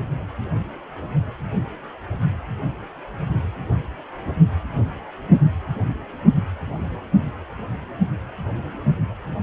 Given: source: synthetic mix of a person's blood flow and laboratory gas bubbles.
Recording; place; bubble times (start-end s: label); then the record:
Doppler ultrasound of blood flow; precordium
6.61-6.88 s: bubbles
From the record:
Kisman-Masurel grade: 111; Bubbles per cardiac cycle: 1 to 2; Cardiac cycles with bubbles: 1 to 10%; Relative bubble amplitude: barely perceptible (0.100 to 0.250); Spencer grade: 1 (occasional bubble signal discernible with the cardiac motion signal, with majority of cardiac periods free of bubbles); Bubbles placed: only in the low amplitude regions of the cardiac cycle